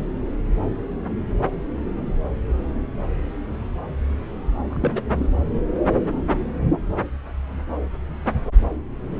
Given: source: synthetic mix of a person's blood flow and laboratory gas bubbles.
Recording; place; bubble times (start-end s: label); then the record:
Doppler ultrasound of blood flow; subclavian vein
4.70-5.01 s: bubbles
5.13-5.29 s: bubbles
From the record:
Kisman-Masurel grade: 211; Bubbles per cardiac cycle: several, 3 to 8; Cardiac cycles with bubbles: 1 to 10%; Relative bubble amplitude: barely perceptible (0.100 to 0.250); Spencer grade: 1 (occasional bubble signal discernible with the cardiac motion signal, with majority of cardiac periods free of bubbles); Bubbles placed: anywhere in the cardiac cycle